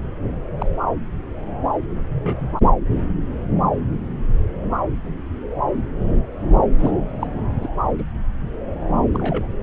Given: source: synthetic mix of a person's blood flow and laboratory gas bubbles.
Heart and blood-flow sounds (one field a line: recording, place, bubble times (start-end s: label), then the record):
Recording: Doppler ultrasound of blood flow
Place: subclavian vein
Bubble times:
0.58-0.66 s: bubbles
2.08-2.49 s: bubbles
6.77-6.91 s: bubbles
7.19-7.27 s: bubbles
7.60-7.67 s: bubbles
7.98-8.03 s: bubbles
9.13-9.49 s: bubbles
From the record:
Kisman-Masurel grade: 122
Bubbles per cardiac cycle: 1 to 2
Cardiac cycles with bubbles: 10 to 50%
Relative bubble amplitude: moderate (0.250 to 0.450)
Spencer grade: 2 (many but less than half of the cardiac periods contain bubble signals, singularly or in groups)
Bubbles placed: anywhere in the cardiac cycle